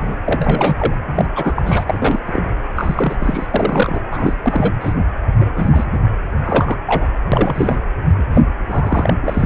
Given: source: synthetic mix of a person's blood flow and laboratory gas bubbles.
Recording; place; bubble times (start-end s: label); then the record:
Doppler ultrasound of blood flow; precordium
0.00-0.15 s: bubbles
0.25-0.95 s: bubbles
1.15-1.25 s: bubbles
1.35-1.84 s: bubbles
1.87-2.20 s: bubbles
2.27-2.41 s: bubbles
2.76-3.47 s: bubbles
3.54-4.00 s: bubbles
4.10-4.33 s: bubbles
4.43-4.72 s: bubbles
4.80-4.92 s: bubbles
5.40-5.46 s: bubbles
5.55-5.85 s: bubbles
5.92-5.98 s: bubbles
6.45-6.77 s: bubbles
6.86-7.08 s: bubbles
7.31-7.77 s: bubbles
8.19-8.25 s: bubbles
8.34-8.41 s: bubbles
8.69-9.14 s: bubbles
9.23-9.46 s: bubbles
From the record:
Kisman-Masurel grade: 242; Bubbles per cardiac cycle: several, 3 to 8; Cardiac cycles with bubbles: 100%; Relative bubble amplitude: moderate (0.250 to 0.450); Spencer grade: 3 (all of the cardiac periods contain showers or single bubble signals, but not dominating or overriding the cardiac motion signals); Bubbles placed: anywhere in the cardiac cycle